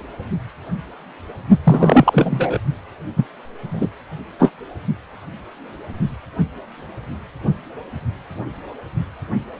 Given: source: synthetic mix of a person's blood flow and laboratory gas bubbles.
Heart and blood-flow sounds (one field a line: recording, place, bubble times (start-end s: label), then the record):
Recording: Doppler ultrasound of blood flow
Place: precordium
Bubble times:
0.00-0.02 s: bubbles
1.64-2.58 s: bubbles
3.16-3.26 s: bubbles
3.67-3.90 s: bubbles
4.38-4.51 s: bubbles
From the record:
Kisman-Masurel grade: 233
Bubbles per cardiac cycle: several, 3 to 8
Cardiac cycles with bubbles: 50 to 99%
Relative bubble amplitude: loud (0.450 to 0.775)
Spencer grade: 3 (all of the cardiac periods contain showers or single bubble signals, but not dominating or overriding the cardiac motion signals)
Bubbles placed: only in the low amplitude regions of the cardiac cycle